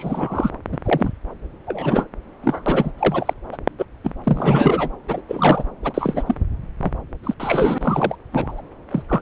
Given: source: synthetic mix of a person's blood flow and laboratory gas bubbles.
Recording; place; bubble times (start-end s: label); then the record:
Doppler ultrasound of blood flow; subclavian vein
0.00-0.51 s: bubbles
0.72-0.78 s: bubbles
0.85-1.12 s: bubbles
1.67-2.06 s: bubbles
2.43-2.92 s: bubbles
2.98-3.33 s: bubbles
3.52-3.58 s: bubbles
3.78-3.85 s: bubbles
4.03-4.13 s: bubbles
4.23-4.89 s: bubbles
5.08-5.21 s: bubbles
5.28-5.64 s: bubbles
5.82-6.22 s: bubbles
6.26-6.34 s: bubbles
6.81-6.92 s: bubbles
7.23-7.34 s: bubbles
7.39-7.78 s: bubbles
7.80-8.15 s: bubbles
8.32-8.61 s: bubbles
8.91-9.03 s: bubbles
9.08-9.21 s: bubbles
From the record:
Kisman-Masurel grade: 243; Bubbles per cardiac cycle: several, 3 to 8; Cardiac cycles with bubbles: 100%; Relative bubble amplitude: loud (0.450 to 0.775); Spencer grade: 3 (all of the cardiac periods contain showers or single bubble signals, but not dominating or overriding the cardiac motion signals); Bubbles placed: anywhere in the cardiac cycle